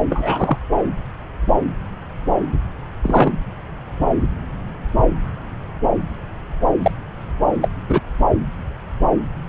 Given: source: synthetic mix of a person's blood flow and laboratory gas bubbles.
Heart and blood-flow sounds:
Doppler ultrasound of blood flow; subclavian vein
0.09-0.59 s: bubbles
3.03-3.30 s: bubbles
6.83-6.92 s: bubbles
7.61-7.69 s: bubbles
7.88-8.00 s: bubbles
From the record:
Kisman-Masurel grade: 123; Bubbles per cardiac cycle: 1 to 2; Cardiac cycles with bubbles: 10 to 50%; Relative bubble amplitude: loud (0.450 to 0.775); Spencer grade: 2 (many but less than half of the cardiac periods contain bubble signals, singularly or in groups); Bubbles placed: anywhere in the cardiac cycle

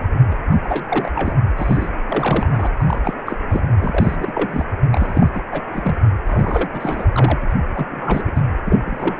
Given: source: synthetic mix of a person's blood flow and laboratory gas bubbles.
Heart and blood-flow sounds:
Doppler ultrasound of blood flow; precordium
0.00-0.06 s: bubbles
0.30-0.35 s: bubbles
0.51-0.56 s: bubbles
0.64-1.34 s: bubbles
1.57-1.90 s: bubbles
2.08-2.47 s: bubbles
2.51-2.67 s: bubbles
2.77-2.99 s: bubbles
3.04-3.14 s: bubbles
3.17-3.22 s: bubbles
3.25-3.36 s: bubbles
3.49-3.62 s: bubbles
3.81-4.16 s: bubbles
4.20-4.64 s: bubbles
4.92-5.29 s: bubbles
5.33-5.41 s: bubbles
5.51-5.62 s: bubbles
5.73-5.98 s: bubbles
6.26-7.08 s: bubbles
7.13-7.47 s: bubbles
7.50-7.54 s: bubbles
7.74-7.87 s: bubbles
7.89-8.31 s: bubbles
8.35-8.41 s: bubbles
8.65-8.79 s: bubbles
8.85-9.14 s: bubbles
From the record:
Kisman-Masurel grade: 342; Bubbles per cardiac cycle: rolling drumbeat, 9 or more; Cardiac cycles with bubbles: 100%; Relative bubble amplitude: moderate (0.250 to 0.450); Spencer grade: 3 (all of the cardiac periods contain showers or single bubble signals, but not dominating or overriding the cardiac motion signals); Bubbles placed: anywhere in the cardiac cycle

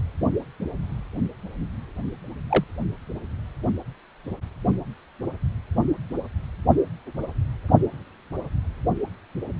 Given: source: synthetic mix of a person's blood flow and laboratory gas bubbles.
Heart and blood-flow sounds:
Doppler ultrasound of blood flow; precordium
2.49-2.64 s: bubbles
From the record:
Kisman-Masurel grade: 112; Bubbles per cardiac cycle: 1 to 2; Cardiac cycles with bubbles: 1 to 10%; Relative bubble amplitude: moderate (0.250 to 0.450); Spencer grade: 1 (occasional bubble signal discernible with the cardiac motion signal, with majority of cardiac periods free of bubbles); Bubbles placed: only in the low amplitude regions of the cardiac cycle

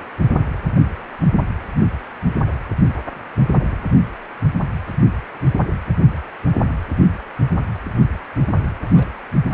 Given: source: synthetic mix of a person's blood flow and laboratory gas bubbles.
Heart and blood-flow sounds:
Doppler ultrasound of blood flow; precordium
3.52-3.78 s: bubbles
8.95-9.07 s: bubbles
From the record:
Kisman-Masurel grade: 121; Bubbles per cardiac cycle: 1 to 2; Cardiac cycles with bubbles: 10 to 50%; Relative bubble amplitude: barely perceptible (0.100 to 0.250); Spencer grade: 2 (many but less than half of the cardiac periods contain bubble signals, singularly or in groups); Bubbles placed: anywhere in the cardiac cycle

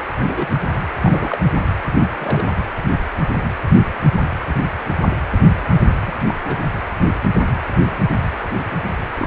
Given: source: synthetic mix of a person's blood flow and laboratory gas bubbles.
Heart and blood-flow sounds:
Doppler ultrasound of blood flow; precordium
0.18-0.59 s: bubbles
0.68-0.73 s: bubbles
1.00-1.39 s: bubbles
1.99-2.04 s: bubbles
2.18-2.58 s: bubbles
5.64-5.79 s: bubbles
6.06-6.11 s: bubbles
6.26-6.34 s: bubbles
6.42-6.68 s: bubbles
8.99-9.27 s: bubbles
From the record:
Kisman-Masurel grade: 221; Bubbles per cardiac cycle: several, 3 to 8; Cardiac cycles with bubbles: 10 to 50%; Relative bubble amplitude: barely perceptible (0.100 to 0.250); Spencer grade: 2 (many but less than half of the cardiac periods contain bubble signals, singularly or in groups); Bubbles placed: anywhere in the cardiac cycle

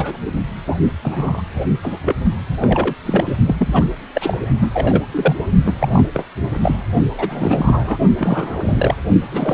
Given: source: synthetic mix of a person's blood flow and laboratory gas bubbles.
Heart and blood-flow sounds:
Doppler ultrasound of blood flow; precordium
0.00-0.17 s: bubbles
0.26-0.32 s: bubbles
0.67-0.76 s: bubbles
1.03-1.43 s: bubbles
1.55-1.65 s: bubbles
1.82-2.16 s: bubbles
2.60-2.95 s: bubbles
3.05-3.36 s: bubbles
3.46-3.56 s: bubbles
3.58-3.84 s: bubbles
4.14-4.38 s: bubbles
4.60-4.71 s: bubbles
4.74-5.03 s: bubbles
5.11-5.38 s: bubbles
5.65-5.74 s: bubbles
5.79-6.08 s: bubbles
6.14-6.25 s: bubbles
6.52-6.58 s: bubbles
6.62-6.77 s: bubbles
7.12-7.98 s: bubbles
8.18-8.94 s: bubbles
9.31-9.54 s: bubbles
From the record:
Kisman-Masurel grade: 242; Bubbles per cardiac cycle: several, 3 to 8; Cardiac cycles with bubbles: 100%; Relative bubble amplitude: moderate (0.250 to 0.450); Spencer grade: 3 (all of the cardiac periods contain showers or single bubble signals, but not dominating or overriding the cardiac motion signals); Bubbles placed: only in the low amplitude regions of the cardiac cycle

